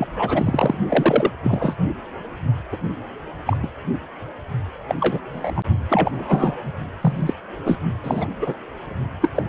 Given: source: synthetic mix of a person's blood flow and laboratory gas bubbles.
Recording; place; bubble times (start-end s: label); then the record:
Doppler ultrasound of blood flow; precordium
0.00-0.07 s: bubbles
0.14-0.78 s: bubbles
0.89-1.30 s: bubbles
1.43-1.76 s: bubbles
2.71-2.78 s: bubbles
3.46-3.57 s: bubbles
3.62-3.67 s: bubbles
4.88-4.95 s: bubbles
5.00-5.20 s: bubbles
5.33-5.62 s: bubbles
5.90-6.11 s: bubbles
6.13-6.55 s: bubbles
7.01-7.33 s: bubbles
7.65-7.77 s: bubbles
8.04-8.26 s: bubbles
8.41-8.54 s: bubbles
9.21-9.29 s: bubbles
9.36-9.43 s: bubbles
From the record:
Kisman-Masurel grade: 242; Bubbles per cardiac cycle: several, 3 to 8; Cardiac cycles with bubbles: 100%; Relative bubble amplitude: moderate (0.250 to 0.450); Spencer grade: 3 (all of the cardiac periods contain showers or single bubble signals, but not dominating or overriding the cardiac motion signals); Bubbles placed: only in the low amplitude regions of the cardiac cycle